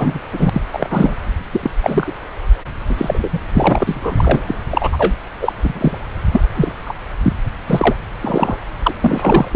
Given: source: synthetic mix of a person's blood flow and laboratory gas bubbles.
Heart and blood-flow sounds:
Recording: Doppler ultrasound of blood flow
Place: subclavian vein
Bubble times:
0.00-0.19 s: bubbles
0.33-0.49 s: bubbles
0.52-0.61 s: bubbles
0.73-1.15 s: bubbles
1.51-1.70 s: bubbles
1.80-2.14 s: bubbles
2.88-3.40 s: bubbles
3.53-4.42 s: bubbles
4.48-4.55 s: bubbles
4.71-5.13 s: bubbles
5.41-5.52 s: bubbles
5.57-5.97 s: bubbles
6.31-6.41 s: bubbles
6.55-6.72 s: bubbles
6.85-6.93 s: bubbles
7.23-7.33 s: bubbles
7.67-7.95 s: bubbles
8.21-8.58 s: bubbles
8.82-8.95 s: bubbles
9.00-9.48 s: bubbles
9.51-9.56 s: bubbles
From the record:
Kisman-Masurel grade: 243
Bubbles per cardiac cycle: several, 3 to 8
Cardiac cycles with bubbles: 100%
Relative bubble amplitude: loud (0.450 to 0.775)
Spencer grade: 3 (all of the cardiac periods contain showers or single bubble signals, but not dominating or overriding the cardiac motion signals)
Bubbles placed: anywhere in the cardiac cycle

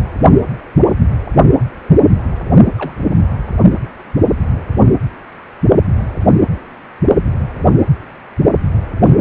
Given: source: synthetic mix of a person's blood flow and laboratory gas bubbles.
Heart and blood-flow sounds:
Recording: Doppler ultrasound of blood flow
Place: precordium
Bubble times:
2.78-2.94 s: bubbles
9.04-9.12 s: bubbles
From the record:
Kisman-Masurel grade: 122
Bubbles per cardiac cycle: 1 to 2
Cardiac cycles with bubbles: 10 to 50%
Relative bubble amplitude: moderate (0.250 to 0.450)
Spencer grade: 2 (many but less than half of the cardiac periods contain bubble signals, singularly or in groups)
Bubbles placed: only in the low amplitude regions of the cardiac cycle

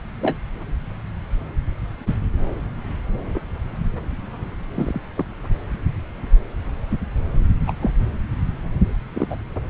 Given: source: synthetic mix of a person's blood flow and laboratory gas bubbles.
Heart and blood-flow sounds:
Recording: Doppler ultrasound of blood flow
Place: subclavian vein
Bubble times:
0.21-0.38 s: bubbles
2.06-2.15 s: bubbles
4.75-5.01 s: bubbles
5.16-5.25 s: bubbles
7.66-7.73 s: bubbles
7.82-7.93 s: bubbles
9.13-9.36 s: bubbles
From the record:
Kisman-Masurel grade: 122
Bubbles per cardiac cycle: 1 to 2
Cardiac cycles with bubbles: 10 to 50%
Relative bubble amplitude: moderate (0.250 to 0.450)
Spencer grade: 2 (many but less than half of the cardiac periods contain bubble signals, singularly or in groups)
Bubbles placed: anywhere in the cardiac cycle

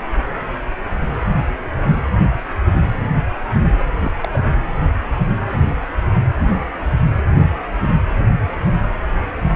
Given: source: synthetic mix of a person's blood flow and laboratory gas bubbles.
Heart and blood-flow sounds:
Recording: Doppler ultrasound of blood flow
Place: precordium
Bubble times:
3.99-4.12 s: bubbles
4.21-4.42 s: bubbles
From the record:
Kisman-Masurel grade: 211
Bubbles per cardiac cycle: several, 3 to 8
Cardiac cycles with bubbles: 1 to 10%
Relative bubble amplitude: barely perceptible (0.100 to 0.250)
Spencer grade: 1 (occasional bubble signal discernible with the cardiac motion signal, with majority of cardiac periods free of bubbles)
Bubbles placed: anywhere in the cardiac cycle

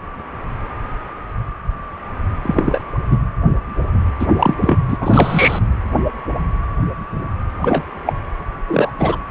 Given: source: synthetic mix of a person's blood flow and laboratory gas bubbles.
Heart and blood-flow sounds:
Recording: Doppler ultrasound of blood flow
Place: precordium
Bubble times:
2.42-2.82 s: bubbles
3.10-3.18 s: bubbles
4.19-4.26 s: bubbles
4.39-4.54 s: bubbles
4.60-4.79 s: bubbles
4.88-4.97 s: bubbles
5.01-5.59 s: bubbles
7.58-7.83 s: bubbles
8.06-8.13 s: bubbles
8.68-8.91 s: bubbles
8.99-9.17 s: bubbles
From the record:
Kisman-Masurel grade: 223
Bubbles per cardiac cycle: several, 3 to 8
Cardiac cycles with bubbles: 10 to 50%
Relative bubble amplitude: loud (0.450 to 0.775)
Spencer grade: 2 (many but less than half of the cardiac periods contain bubble signals, singularly or in groups)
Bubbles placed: anywhere in the cardiac cycle

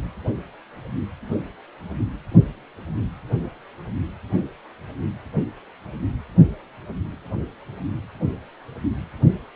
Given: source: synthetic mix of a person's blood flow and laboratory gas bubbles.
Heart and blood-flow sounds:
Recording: Doppler ultrasound of blood flow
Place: precordium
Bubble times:
no bubbles
From the record:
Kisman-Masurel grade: 000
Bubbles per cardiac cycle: 0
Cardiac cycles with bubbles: 0%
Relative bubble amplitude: no bubbles discernible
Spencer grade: 0 (complete lack of bubble signals)

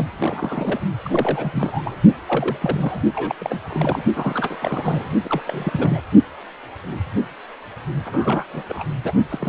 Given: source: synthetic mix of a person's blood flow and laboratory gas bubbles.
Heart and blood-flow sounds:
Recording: Doppler ultrasound of blood flow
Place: precordium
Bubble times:
0.00-0.05 s: bubbles
0.20-0.81 s: bubbles
1.04-1.99 s: bubbles
2.27-2.57 s: bubbles
2.60-3.02 s: bubbles
3.15-3.35 s: bubbles
3.40-3.62 s: bubbles
3.65-4.05 s: bubbles
4.15-4.57 s: bubbles
4.61-5.08 s: bubbles
5.24-5.41 s: bubbles
5.47-6.00 s: bubbles
8.05-8.45 s: bubbles
8.53-8.63 s: bubbles
8.69-8.84 s: bubbles
9.04-9.13 s: bubbles
9.29-9.49 s: bubbles
From the record:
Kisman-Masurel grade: 332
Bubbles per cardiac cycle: rolling drumbeat, 9 or more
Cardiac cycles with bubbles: 50 to 99%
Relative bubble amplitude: moderate (0.250 to 0.450)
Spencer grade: 3 (all of the cardiac periods contain showers or single bubble signals, but not dominating or overriding the cardiac motion signals)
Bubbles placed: only in the low amplitude regions of the cardiac cycle

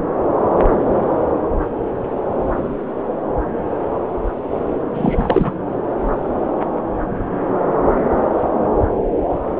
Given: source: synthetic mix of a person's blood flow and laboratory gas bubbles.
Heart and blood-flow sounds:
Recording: Doppler ultrasound of blood flow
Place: subclavian vein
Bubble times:
4.94-5.52 s: bubbles
From the record:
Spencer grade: 1 (occasional bubble signal discernible with the cardiac motion signal, with majority of cardiac periods free of bubbles)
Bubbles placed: anywhere in the cardiac cycle

